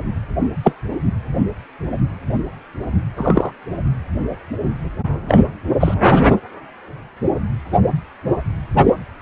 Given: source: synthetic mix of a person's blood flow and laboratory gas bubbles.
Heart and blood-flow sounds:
Doppler ultrasound of blood flow; precordium
0.64-0.75 s: bubbles
3.17-3.51 s: bubbles
5.28-5.39 s: bubbles
5.79-5.94 s: bubbles
8.78-8.94 s: bubbles
From the record:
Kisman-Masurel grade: 123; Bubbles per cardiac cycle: 1 to 2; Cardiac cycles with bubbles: 10 to 50%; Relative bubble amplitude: loud (0.450 to 0.775); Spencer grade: 2 (many but less than half of the cardiac periods contain bubble signals, singularly or in groups); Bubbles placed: anywhere in the cardiac cycle

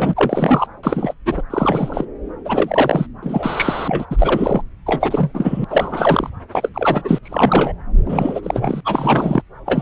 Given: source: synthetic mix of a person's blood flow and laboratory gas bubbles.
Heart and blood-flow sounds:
Doppler ultrasound of blood flow; subclavian vein
0.00-0.13 s: bubbles
0.16-0.66 s: bubbles
0.83-1.13 s: bubbles
1.26-1.43 s: bubbles
1.50-2.05 s: bubbles
2.45-3.06 s: bubbles
3.23-4.05 s: bubbles
4.10-4.61 s: bubbles
4.86-5.64 s: bubbles
5.68-6.30 s: bubbles
6.51-6.69 s: bubbles
6.74-7.18 s: bubbles
7.23-7.72 s: bubbles
8.04-8.80 s: bubbles
8.84-9.42 s: bubbles
9.65-9.82 s: bubbles
From the record:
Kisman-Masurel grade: 333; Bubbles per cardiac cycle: rolling drumbeat, 9 or more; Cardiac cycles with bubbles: 50 to 99%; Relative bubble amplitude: loud (0.450 to 0.775); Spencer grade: 3 (all of the cardiac periods contain showers or single bubble signals, but not dominating or overriding the cardiac motion signals); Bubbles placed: anywhere in the cardiac cycle

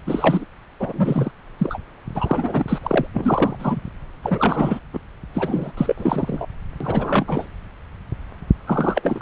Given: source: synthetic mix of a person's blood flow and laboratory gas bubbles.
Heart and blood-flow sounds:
Doppler ultrasound of blood flow; subclavian vein
0.07-0.45 s: bubbles
0.79-1.31 s: bubbles
1.57-1.78 s: bubbles
2.15-2.65 s: bubbles
2.68-2.79 s: bubbles
2.83-3.07 s: bubbles
3.14-3.80 s: bubbles
4.22-4.79 s: bubbles
4.93-5.00 s: bubbles
5.33-5.72 s: bubbles
5.77-6.46 s: bubbles
6.80-7.48 s: bubbles
8.66-9.22 s: bubbles
From the record:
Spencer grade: 3 (all of the cardiac periods contain showers or single bubble signals, but not dominating or overriding the cardiac motion signals); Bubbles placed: anywhere in the cardiac cycle

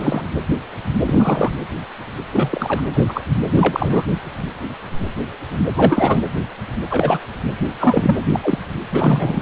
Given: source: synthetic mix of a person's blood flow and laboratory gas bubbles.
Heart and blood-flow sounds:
Doppler ultrasound of blood flow; precordium
0.00-0.30 s: bubbles
1.01-1.51 s: bubbles
2.32-2.81 s: bubbles
2.94-3.04 s: bubbles
3.08-3.21 s: bubbles
3.56-4.04 s: bubbles
5.76-6.21 s: bubbles
6.90-7.19 s: bubbles
7.79-8.16 s: bubbles
8.33-8.58 s: bubbles
8.92-9.41 s: bubbles
From the record:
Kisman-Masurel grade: 233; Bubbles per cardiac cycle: several, 3 to 8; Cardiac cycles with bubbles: 50 to 99%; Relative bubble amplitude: loud (0.450 to 0.775); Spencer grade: 3 (all of the cardiac periods contain showers or single bubble signals, but not dominating or overriding the cardiac motion signals); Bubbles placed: anywhere in the cardiac cycle

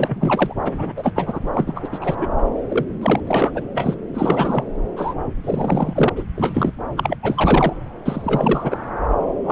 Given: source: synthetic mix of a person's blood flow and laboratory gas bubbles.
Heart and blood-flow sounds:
Doppler ultrasound of blood flow; subclavian vein
0.00-0.54 s: bubbles
0.65-0.92 s: bubbles
0.96-1.40 s: bubbles
1.54-1.73 s: bubbles
1.75-1.89 s: bubbles
1.92-2.27 s: bubbles
2.69-2.85 s: bubbles
3.02-3.20 s: bubbles
3.27-3.51 s: bubbles
3.54-3.64 s: bubbles
3.74-3.96 s: bubbles
4.14-4.64 s: bubbles
4.96-5.14 s: bubbles
5.44-6.10 s: bubbles
6.16-6.23 s: bubbles
6.36-6.73 s: bubbles
6.97-7.17 s: bubbles
7.23-7.73 s: bubbles
8.05-8.79 s: bubbles
9.44-9.52 s: bubbles
From the record:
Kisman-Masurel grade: 343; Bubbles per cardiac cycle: rolling drumbeat, 9 or more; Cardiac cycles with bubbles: 100%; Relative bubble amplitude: loud (0.450 to 0.775); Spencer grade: 3 (all of the cardiac periods contain showers or single bubble signals, but not dominating or overriding the cardiac motion signals); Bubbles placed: anywhere in the cardiac cycle

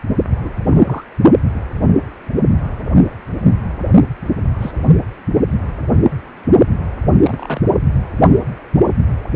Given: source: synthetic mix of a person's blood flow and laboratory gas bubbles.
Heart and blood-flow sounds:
Doppler ultrasound of blood flow; precordium
0.41-0.52 s: bubbles
0.68-1.04 s: bubbles
4.60-4.71 s: bubbles
7.22-7.61 s: bubbles
From the record:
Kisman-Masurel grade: 122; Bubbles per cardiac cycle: 1 to 2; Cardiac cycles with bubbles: 10 to 50%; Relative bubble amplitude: moderate (0.250 to 0.450); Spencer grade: 2 (many but less than half of the cardiac periods contain bubble signals, singularly or in groups); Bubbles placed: only in the low amplitude regions of the cardiac cycle

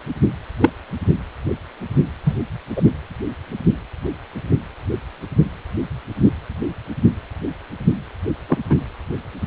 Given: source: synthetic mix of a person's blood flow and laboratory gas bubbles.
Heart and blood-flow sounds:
Doppler ultrasound of blood flow; precordium
0.61-0.69 s: bubbles
2.25-2.35 s: bubbles
2.76-2.82 s: bubbles
8.48-8.58 s: bubbles
8.70-8.75 s: bubbles
From the record:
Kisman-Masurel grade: 123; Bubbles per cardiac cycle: 1 to 2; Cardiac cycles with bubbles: 10 to 50%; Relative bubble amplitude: loud (0.450 to 0.775); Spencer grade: 2 (many but less than half of the cardiac periods contain bubble signals, singularly or in groups); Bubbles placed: anywhere in the cardiac cycle

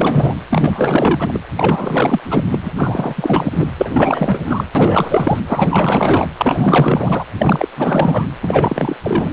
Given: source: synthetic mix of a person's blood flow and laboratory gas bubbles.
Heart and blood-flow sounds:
Doppler ultrasound of blood flow; precordium
0.00-0.37 s: bubbles
0.50-1.39 s: bubbles
1.57-2.44 s: bubbles
2.51-2.72 s: bubbles
2.76-3.71 s: bubbles
3.77-4.64 s: bubbles
4.75-5.40 s: bubbles
5.48-6.28 s: bubbles
6.37-7.26 s: bubbles
7.38-7.68 s: bubbles
7.76-8.26 s: bubbles
8.42-8.96 s: bubbles
9.03-9.31 s: bubbles
From the record:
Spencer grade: 4 (maximum detectable bubble signal sounding continuously throughout systole and diastole of every cardiac period, and overriding the amplitude of the normal cardiac signals); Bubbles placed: anywhere in the cardiac cycle

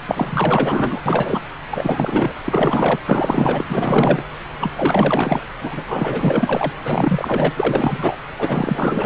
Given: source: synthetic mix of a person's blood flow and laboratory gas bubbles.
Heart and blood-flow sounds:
Doppler ultrasound of blood flow; subclavian vein
0.07-1.02 s: bubbles
1.05-1.41 s: bubbles
1.70-2.33 s: bubbles
2.45-3.00 s: bubbles
3.05-3.64 s: bubbles
3.68-4.22 s: bubbles
4.59-4.71 s: bubbles
4.76-5.40 s: bubbles
5.61-6.73 s: bubbles
6.77-6.80 s: bubbles
6.84-7.52 s: bubbles
7.56-8.16 s: bubbles
8.38-9.05 s: bubbles
From the record:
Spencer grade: 4 (maximum detectable bubble signal sounding continuously throughout systole and diastole of every cardiac period, and overriding the amplitude of the normal cardiac signals); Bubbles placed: anywhere in the cardiac cycle

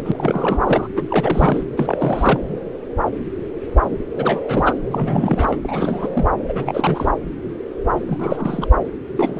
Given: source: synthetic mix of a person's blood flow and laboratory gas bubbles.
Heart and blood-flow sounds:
Doppler ultrasound of blood flow; subclavian vein
0.00-0.02 s: bubbles
0.04-0.88 s: bubbles
0.96-1.02 s: bubbles
1.08-1.64 s: bubbles
1.77-2.40 s: bubbles
4.16-4.40 s: bubbles
4.48-4.73 s: bubbles
4.90-5.57 s: bubbles
5.62-6.27 s: bubbles
6.48-7.10 s: bubbles
8.06-8.67 s: bubbles
9.17-9.40 s: bubbles
From the record:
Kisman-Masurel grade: 332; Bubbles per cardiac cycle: rolling drumbeat, 9 or more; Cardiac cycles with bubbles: 50 to 99%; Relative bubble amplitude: moderate (0.250 to 0.450); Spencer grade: 3 (all of the cardiac periods contain showers or single bubble signals, but not dominating or overriding the cardiac motion signals); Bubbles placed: anywhere in the cardiac cycle

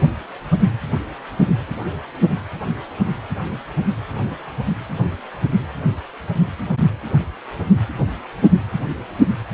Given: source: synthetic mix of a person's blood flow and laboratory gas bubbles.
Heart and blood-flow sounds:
Doppler ultrasound of blood flow; precordium
no bubbles
From the record:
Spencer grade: 0 (complete lack of bubble signals)

